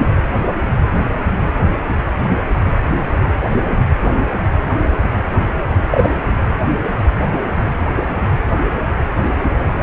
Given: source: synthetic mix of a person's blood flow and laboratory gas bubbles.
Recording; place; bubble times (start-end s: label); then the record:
Doppler ultrasound of blood flow; precordium
5.91-6.10 s: bubbles
From the record:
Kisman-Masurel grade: 113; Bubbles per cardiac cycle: 1 to 2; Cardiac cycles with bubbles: 1 to 10%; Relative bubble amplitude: loud (0.450 to 0.775); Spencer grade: 1 (occasional bubble signal discernible with the cardiac motion signal, with majority of cardiac periods free of bubbles); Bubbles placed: anywhere in the cardiac cycle